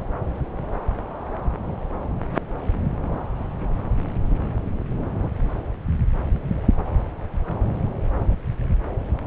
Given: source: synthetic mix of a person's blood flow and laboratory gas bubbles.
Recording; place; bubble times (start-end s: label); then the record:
Doppler ultrasound of blood flow; subclavian vein
no bubbles
From the record:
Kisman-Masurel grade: 000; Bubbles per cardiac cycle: 0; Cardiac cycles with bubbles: 0%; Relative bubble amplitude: no bubbles discernible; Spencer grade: 0 (complete lack of bubble signals)